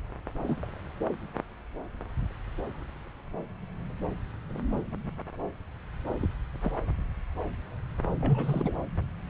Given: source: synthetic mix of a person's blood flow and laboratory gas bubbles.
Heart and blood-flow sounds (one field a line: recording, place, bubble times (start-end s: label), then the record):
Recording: Doppler ultrasound of blood flow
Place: subclavian vein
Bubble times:
0.38-0.60 s: bubbles
0.63-0.66 s: bubbles
6.21-6.26 s: bubbles
6.61-6.72 s: bubbles
8.16-8.77 s: bubbles
From the record:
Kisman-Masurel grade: 221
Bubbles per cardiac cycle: several, 3 to 8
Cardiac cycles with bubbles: 10 to 50%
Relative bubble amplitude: barely perceptible (0.100 to 0.250)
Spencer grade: 2 (many but less than half of the cardiac periods contain bubble signals, singularly or in groups)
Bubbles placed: anywhere in the cardiac cycle